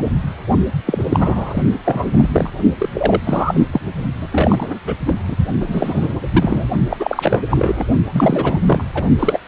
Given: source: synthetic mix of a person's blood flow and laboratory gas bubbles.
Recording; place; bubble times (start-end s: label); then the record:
Doppler ultrasound of blood flow; precordium
0.00-0.12 s: bubbles
0.86-1.04 s: bubbles
1.09-1.62 s: bubbles
1.85-2.29 s: bubbles
2.32-2.50 s: bubbles
2.79-2.89 s: bubbles
2.94-3.21 s: bubbles
3.24-3.65 s: bubbles
3.72-3.81 s: bubbles
4.21-4.28 s: bubbles
4.31-4.79 s: bubbles
4.86-4.94 s: bubbles
5.06-5.16 s: bubbles
5.28-5.36 s: bubbles
5.60-6.14 s: bubbles
6.33-6.69 s: bubbles
6.89-7.43 s: bubbles
7.50-7.83 s: bubbles
8.12-8.60 s: bubbles
8.66-8.83 s: bubbles
8.94-9.04 s: bubbles
9.19-9.38 s: bubbles
From the record:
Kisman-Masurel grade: 343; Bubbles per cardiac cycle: rolling drumbeat, 9 or more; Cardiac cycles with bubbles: 100%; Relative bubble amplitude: loud (0.450 to 0.775); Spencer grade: 3 (all of the cardiac periods contain showers or single bubble signals, but not dominating or overriding the cardiac motion signals); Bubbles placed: only in the low amplitude regions of the cardiac cycle